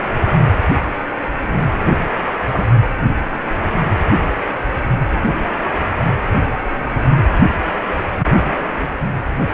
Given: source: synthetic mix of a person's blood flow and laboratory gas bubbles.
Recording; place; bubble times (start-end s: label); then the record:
Doppler ultrasound of blood flow; precordium
2.51-2.67 s: bubbles
From the record:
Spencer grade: 1 (occasional bubble signal discernible with the cardiac motion signal, with majority of cardiac periods free of bubbles); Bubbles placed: anywhere in the cardiac cycle